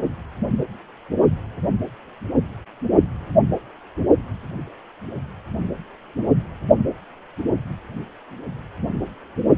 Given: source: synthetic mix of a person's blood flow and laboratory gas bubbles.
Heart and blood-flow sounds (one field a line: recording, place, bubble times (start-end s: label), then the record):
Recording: Doppler ultrasound of blood flow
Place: precordium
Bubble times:
no bubbles
From the record:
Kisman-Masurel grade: 000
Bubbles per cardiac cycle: 0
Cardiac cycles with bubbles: 0%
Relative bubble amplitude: no bubbles discernible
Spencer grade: 0 (complete lack of bubble signals)